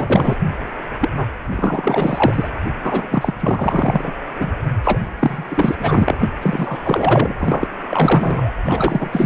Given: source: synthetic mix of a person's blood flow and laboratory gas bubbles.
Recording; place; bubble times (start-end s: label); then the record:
Doppler ultrasound of blood flow; precordium
0.00-0.41 s: bubbles
1.00-1.09 s: bubbles
1.16-1.27 s: bubbles
1.51-2.49 s: bubbles
2.83-3.08 s: bubbles
3.10-3.35 s: bubbles
3.40-4.12 s: bubbles
4.38-4.51 s: bubbles
4.83-5.00 s: bubbles
5.20-5.44 s: bubbles
5.48-5.75 s: bubbles
5.79-6.29 s: bubbles
6.42-7.36 s: bubbles
7.40-7.68 s: bubbles
7.87-8.54 s: bubbles
8.63-9.09 s: bubbles
9.12-9.26 s: bubbles
From the record:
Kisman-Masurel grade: 444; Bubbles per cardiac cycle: continuous sound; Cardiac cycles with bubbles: 100%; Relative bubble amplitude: maximal (0.775 to 0.999); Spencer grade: 4 (maximum detectable bubble signal sounding continuously throughout systole and diastole of every cardiac period, and overriding the amplitude of the normal cardiac signals); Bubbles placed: anywhere in the cardiac cycle